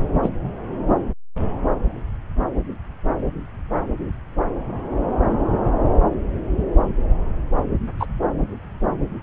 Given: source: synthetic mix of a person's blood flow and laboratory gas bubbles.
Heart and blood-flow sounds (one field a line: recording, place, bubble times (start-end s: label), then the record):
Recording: Doppler ultrasound of blood flow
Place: subclavian vein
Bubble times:
0.22-0.29 s: bubbles
7.99-8.06 s: bubbles
From the record:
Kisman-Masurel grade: 123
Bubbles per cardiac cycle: 1 to 2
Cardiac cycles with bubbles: 10 to 50%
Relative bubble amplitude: loud (0.450 to 0.775)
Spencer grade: 2 (many but less than half of the cardiac periods contain bubble signals, singularly or in groups)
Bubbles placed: anywhere in the cardiac cycle